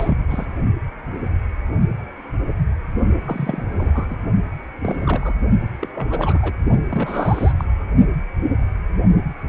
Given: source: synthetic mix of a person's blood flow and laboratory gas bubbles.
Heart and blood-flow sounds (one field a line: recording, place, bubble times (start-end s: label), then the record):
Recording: Doppler ultrasound of blood flow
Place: precordium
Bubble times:
0.00-0.18 s: bubbles
0.29-0.45 s: bubbles
3.25-3.63 s: bubbles
3.77-4.17 s: bubbles
4.82-5.34 s: bubbles
5.81-5.88 s: bubbles
5.95-6.52 s: bubbles
6.89-7.52 s: bubbles
7.57-7.64 s: bubbles
From the record:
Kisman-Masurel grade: 232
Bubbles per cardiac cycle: several, 3 to 8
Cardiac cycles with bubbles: 50 to 99%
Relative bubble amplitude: moderate (0.250 to 0.450)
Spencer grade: 3 (all of the cardiac periods contain showers or single bubble signals, but not dominating or overriding the cardiac motion signals)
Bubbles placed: only in the low amplitude regions of the cardiac cycle